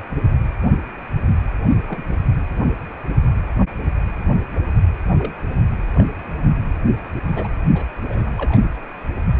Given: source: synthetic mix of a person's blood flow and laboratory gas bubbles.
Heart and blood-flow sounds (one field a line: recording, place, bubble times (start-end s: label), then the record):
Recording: Doppler ultrasound of blood flow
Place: precordium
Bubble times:
1.88-2.02 s: bubbles
2.11-2.16 s: bubbles
5.18-5.33 s: bubbles
5.95-6.11 s: bubbles
7.32-7.47 s: bubbles
7.75-7.84 s: bubbles
8.04-8.32 s: bubbles
8.37-8.62 s: bubbles
From the record:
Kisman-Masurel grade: 221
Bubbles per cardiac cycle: several, 3 to 8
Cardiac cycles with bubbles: 10 to 50%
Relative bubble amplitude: barely perceptible (0.100 to 0.250)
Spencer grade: 2 (many but less than half of the cardiac periods contain bubble signals, singularly or in groups)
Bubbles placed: anywhere in the cardiac cycle